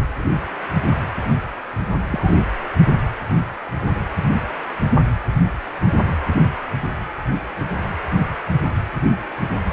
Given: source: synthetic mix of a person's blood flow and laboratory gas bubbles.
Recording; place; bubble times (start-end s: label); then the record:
Doppler ultrasound of blood flow; precordium
1.92-2.03 s: bubbles
2.06-2.43 s: bubbles
From the record:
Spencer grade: 1 (occasional bubble signal discernible with the cardiac motion signal, with majority of cardiac periods free of bubbles); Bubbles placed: anywhere in the cardiac cycle